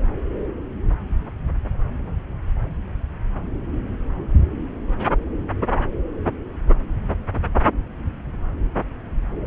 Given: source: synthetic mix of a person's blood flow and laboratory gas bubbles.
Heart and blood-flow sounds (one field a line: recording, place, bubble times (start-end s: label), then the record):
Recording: Doppler ultrasound of blood flow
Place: subclavian vein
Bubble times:
no bubbles
From the record:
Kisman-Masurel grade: 000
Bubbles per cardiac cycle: 0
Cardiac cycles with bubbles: 0%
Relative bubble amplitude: no bubbles discernible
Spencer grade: 0 (complete lack of bubble signals)